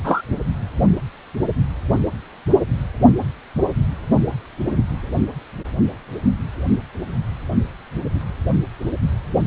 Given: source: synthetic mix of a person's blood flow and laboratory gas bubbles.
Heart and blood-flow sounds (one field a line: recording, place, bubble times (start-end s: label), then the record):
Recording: Doppler ultrasound of blood flow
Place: precordium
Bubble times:
0.04-0.23 s: bubbles
From the record:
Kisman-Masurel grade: 113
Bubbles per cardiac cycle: 1 to 2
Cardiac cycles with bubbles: 1 to 10%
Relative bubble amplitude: loud (0.450 to 0.775)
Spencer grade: 1 (occasional bubble signal discernible with the cardiac motion signal, with majority of cardiac periods free of bubbles)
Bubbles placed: only in the low amplitude regions of the cardiac cycle